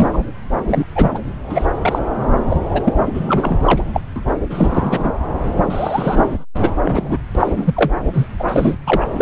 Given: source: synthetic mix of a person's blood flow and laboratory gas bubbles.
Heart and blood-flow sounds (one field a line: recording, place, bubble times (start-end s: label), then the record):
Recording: Doppler ultrasound of blood flow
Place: subclavian vein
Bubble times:
0.00-0.10 s: bubbles
0.13-0.18 s: bubbles
0.68-0.85 s: bubbles
0.95-1.10 s: bubbles
1.14-1.20 s: bubbles
1.49-1.67 s: bubbles
1.82-1.99 s: bubbles
2.50-2.56 s: bubbles
2.67-2.81 s: bubbles
2.84-2.94 s: bubbles
3.06-3.59 s: bubbles
3.64-3.82 s: bubbles
3.94-4.01 s: bubbles
4.16-4.23 s: bubbles
4.50-5.12 s: bubbles
5.70-6.45 s: bubbles
6.61-6.70 s: bubbles
6.81-7.18 s: bubbles
7.35-7.93 s: bubbles
8.13-8.27 s: bubbles
8.39-8.44 s: bubbles
8.47-8.76 s: bubbles
8.86-9.07 s: bubbles
9.12-9.22 s: bubbles
From the record:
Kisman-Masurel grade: 343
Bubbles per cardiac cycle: rolling drumbeat, 9 or more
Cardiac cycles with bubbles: 100%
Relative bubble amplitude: loud (0.450 to 0.775)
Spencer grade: 3 (all of the cardiac periods contain showers or single bubble signals, but not dominating or overriding the cardiac motion signals)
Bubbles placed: anywhere in the cardiac cycle